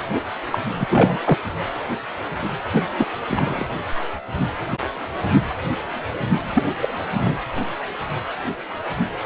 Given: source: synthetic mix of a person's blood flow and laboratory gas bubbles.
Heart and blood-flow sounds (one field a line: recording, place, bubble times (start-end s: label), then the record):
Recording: Doppler ultrasound of blood flow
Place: precordium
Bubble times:
0.51-0.59 s: bubbles
0.80-1.38 s: bubbles
2.74-2.83 s: bubbles
2.97-3.06 s: bubbles
3.28-3.65 s: bubbles
6.54-6.63 s: bubbles
6.81-6.93 s: bubbles
7.17-7.35 s: bubbles
From the record:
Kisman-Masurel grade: 222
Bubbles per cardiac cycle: several, 3 to 8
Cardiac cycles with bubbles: 10 to 50%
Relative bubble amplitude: moderate (0.250 to 0.450)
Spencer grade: 2 (many but less than half of the cardiac periods contain bubble signals, singularly or in groups)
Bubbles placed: anywhere in the cardiac cycle